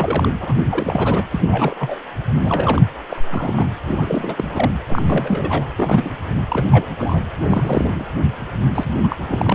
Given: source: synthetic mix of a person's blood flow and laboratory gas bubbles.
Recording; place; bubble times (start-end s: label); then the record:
Doppler ultrasound of blood flow; precordium
0.00-0.30 s: bubbles
0.41-0.61 s: bubbles
0.69-1.23 s: bubbles
1.31-1.40 s: bubbles
1.47-1.75 s: bubbles
1.79-1.97 s: bubbles
2.44-2.82 s: bubbles
3.10-3.22 s: bubbles
3.30-3.67 s: bubbles
3.88-4.71 s: bubbles
4.88-5.66 s: bubbles
5.78-6.10 s: bubbles
6.29-6.42 s: bubbles
6.48-6.86 s: bubbles
6.98-7.21 s: bubbles
7.40-8.06 s: bubbles
8.74-8.90 s: bubbles
9.03-9.16 s: bubbles
9.19-9.55 s: bubbles
From the record:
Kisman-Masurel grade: 342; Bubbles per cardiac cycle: rolling drumbeat, 9 or more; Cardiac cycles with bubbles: 100%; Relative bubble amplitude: moderate (0.250 to 0.450); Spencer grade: 3 (all of the cardiac periods contain showers or single bubble signals, but not dominating or overriding the cardiac motion signals); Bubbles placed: anywhere in the cardiac cycle